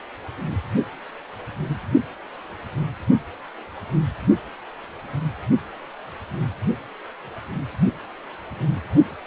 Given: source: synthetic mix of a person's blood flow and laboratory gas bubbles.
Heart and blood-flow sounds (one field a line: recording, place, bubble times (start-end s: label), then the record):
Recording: Doppler ultrasound of blood flow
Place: precordium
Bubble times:
no bubbles
From the record:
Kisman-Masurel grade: 000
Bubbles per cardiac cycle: 0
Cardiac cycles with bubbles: 0%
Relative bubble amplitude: no bubbles discernible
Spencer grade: 0 (complete lack of bubble signals)